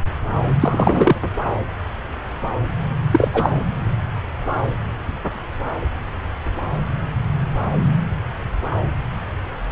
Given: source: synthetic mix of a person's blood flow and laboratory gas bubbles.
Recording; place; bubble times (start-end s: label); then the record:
Doppler ultrasound of blood flow; subclavian vein
0.61-1.16 s: bubbles
3.11-3.29 s: bubbles
3.33-3.50 s: bubbles
From the record:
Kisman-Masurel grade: 223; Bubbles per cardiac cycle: several, 3 to 8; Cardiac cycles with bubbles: 10 to 50%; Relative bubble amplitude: loud (0.450 to 0.775); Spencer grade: 2 (many but less than half of the cardiac periods contain bubble signals, singularly or in groups); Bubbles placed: anywhere in the cardiac cycle